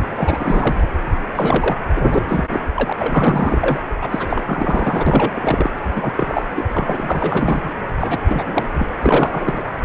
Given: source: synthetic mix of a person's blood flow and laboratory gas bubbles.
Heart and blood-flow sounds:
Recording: Doppler ultrasound of blood flow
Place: precordium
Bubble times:
0.16-0.77 s: bubbles
1.35-1.76 s: bubbles
1.95-2.01 s: bubbles
2.12-2.23 s: bubbles
2.27-2.45 s: bubbles
2.50-2.60 s: bubbles
2.75-2.93 s: bubbles
2.98-3.79 s: bubbles
4.01-5.71 s: bubbles
5.94-6.13 s: bubbles
6.17-6.44 s: bubbles
6.55-6.66 s: bubbles
6.73-7.69 s: bubbles
8.00-8.19 s: bubbles
8.28-8.68 s: bubbles
8.78-8.87 s: bubbles
9.02-9.63 s: bubbles
From the record:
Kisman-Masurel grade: 332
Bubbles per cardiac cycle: rolling drumbeat, 9 or more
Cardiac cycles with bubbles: 50 to 99%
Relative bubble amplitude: moderate (0.250 to 0.450)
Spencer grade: 3 (all of the cardiac periods contain showers or single bubble signals, but not dominating or overriding the cardiac motion signals)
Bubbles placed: anywhere in the cardiac cycle

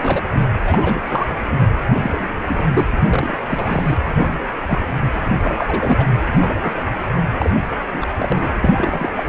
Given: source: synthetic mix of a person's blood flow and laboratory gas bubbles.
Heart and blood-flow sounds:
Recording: Doppler ultrasound of blood flow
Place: precordium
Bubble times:
0.00-0.22 s: bubbles
0.34-0.45 s: bubbles
0.62-0.97 s: bubbles
1.07-1.27 s: bubbles
2.02-2.27 s: bubbles
2.48-2.69 s: bubbles
2.73-2.85 s: bubbles
3.10-3.38 s: bubbles
3.47-3.97 s: bubbles
4.17-4.34 s: bubbles
4.68-4.78 s: bubbles
5.14-5.22 s: bubbles
5.41-6.07 s: bubbles
6.41-6.54 s: bubbles
6.60-6.73 s: bubbles
7.38-7.57 s: bubbles
7.92-8.06 s: bubbles
8.18-8.48 s: bubbles
8.61-9.10 s: bubbles
9.16-9.24 s: bubbles
From the record:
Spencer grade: 3 (all of the cardiac periods contain showers or single bubble signals, but not dominating or overriding the cardiac motion signals)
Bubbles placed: anywhere in the cardiac cycle

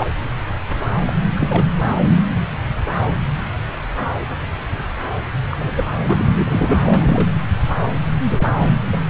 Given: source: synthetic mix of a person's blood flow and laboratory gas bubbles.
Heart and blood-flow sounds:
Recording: Doppler ultrasound of blood flow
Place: subclavian vein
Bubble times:
0.00-0.07 s: bubbles
1.06-1.13 s: bubbles
1.36-1.65 s: bubbles
5.51-5.57 s: bubbles
5.60-5.74 s: bubbles
5.77-5.84 s: bubbles
6.06-6.79 s: bubbles
6.85-7.31 s: bubbles
8.29-8.55 s: bubbles
8.92-9.01 s: bubbles
From the record:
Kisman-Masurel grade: 222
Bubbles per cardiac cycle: several, 3 to 8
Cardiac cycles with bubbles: 10 to 50%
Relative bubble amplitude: moderate (0.250 to 0.450)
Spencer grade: 2 (many but less than half of the cardiac periods contain bubble signals, singularly or in groups)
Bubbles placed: anywhere in the cardiac cycle

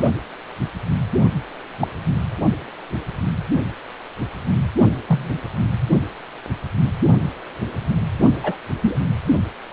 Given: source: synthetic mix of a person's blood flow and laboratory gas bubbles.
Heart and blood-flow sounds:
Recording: Doppler ultrasound of blood flow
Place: precordium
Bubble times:
0.00-0.12 s: bubbles
1.79-1.88 s: bubbles
5.08-5.38 s: bubbles
8.37-8.57 s: bubbles
8.82-8.97 s: bubbles
From the record:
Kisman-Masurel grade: 123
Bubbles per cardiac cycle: 1 to 2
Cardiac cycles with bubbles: 10 to 50%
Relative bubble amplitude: loud (0.450 to 0.775)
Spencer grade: 2 (many but less than half of the cardiac periods contain bubble signals, singularly or in groups)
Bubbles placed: only in the low amplitude regions of the cardiac cycle

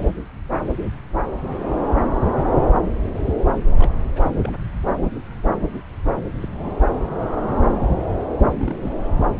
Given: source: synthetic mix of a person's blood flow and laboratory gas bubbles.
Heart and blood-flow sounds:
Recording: Doppler ultrasound of blood flow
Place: subclavian vein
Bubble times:
3.77-3.91 s: bubbles
4.16-4.29 s: bubbles
4.43-4.54 s: bubbles
6.42-6.48 s: bubbles
6.51-6.75 s: bubbles
8.58-8.75 s: bubbles
8.79-8.93 s: bubbles
From the record:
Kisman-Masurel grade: 221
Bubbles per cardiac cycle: several, 3 to 8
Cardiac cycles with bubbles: 10 to 50%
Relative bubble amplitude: barely perceptible (0.100 to 0.250)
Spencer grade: 2 (many but less than half of the cardiac periods contain bubble signals, singularly or in groups)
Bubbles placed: anywhere in the cardiac cycle

